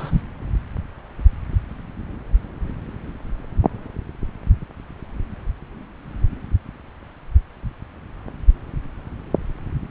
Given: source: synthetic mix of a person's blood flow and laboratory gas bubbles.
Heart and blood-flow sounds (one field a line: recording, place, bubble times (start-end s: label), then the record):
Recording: Doppler ultrasound of blood flow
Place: subclavian vein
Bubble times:
0.00-0.21 s: bubbles
From the record:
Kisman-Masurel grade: 222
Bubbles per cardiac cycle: several, 3 to 8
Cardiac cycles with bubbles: 10 to 50%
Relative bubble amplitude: moderate (0.250 to 0.450)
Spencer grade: 2 (many but less than half of the cardiac periods contain bubble signals, singularly or in groups)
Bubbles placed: anywhere in the cardiac cycle